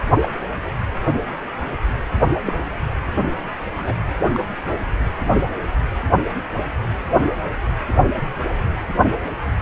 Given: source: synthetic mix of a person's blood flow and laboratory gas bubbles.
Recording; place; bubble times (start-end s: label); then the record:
Doppler ultrasound of blood flow; precordium
0.19-0.29 s: bubbles
2.45-2.54 s: bubbles
3.77-3.95 s: bubbles
4.33-4.40 s: bubbles
4.65-4.71 s: bubbles
From the record:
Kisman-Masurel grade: 122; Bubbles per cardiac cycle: 1 to 2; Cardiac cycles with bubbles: 10 to 50%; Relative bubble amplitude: moderate (0.250 to 0.450); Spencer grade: 2 (many but less than half of the cardiac periods contain bubble signals, singularly or in groups); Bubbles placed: anywhere in the cardiac cycle